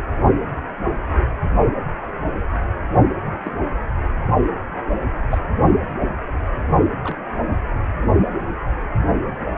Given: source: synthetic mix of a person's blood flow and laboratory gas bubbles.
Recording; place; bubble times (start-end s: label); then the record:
Doppler ultrasound of blood flow; precordium
3.44-3.52 s: bubbles
5.31-5.38 s: bubbles
7.04-7.17 s: bubbles
From the record:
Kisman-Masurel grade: 121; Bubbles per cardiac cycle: 1 to 2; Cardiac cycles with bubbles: 10 to 50%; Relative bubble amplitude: barely perceptible (0.100 to 0.250); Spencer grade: 2 (many but less than half of the cardiac periods contain bubble signals, singularly or in groups); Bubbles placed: only in the low amplitude regions of the cardiac cycle